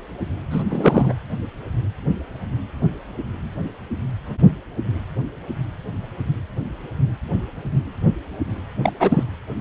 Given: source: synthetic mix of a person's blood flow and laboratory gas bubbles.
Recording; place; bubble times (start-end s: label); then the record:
Doppler ultrasound of blood flow; precordium
0.50-0.64 s: bubbles
0.69-1.13 s: bubbles
8.84-8.91 s: bubbles
8.99-9.23 s: bubbles
From the record:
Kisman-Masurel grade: 223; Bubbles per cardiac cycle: several, 3 to 8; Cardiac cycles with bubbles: 10 to 50%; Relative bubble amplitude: loud (0.450 to 0.775); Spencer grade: 2 (many but less than half of the cardiac periods contain bubble signals, singularly or in groups); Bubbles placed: anywhere in the cardiac cycle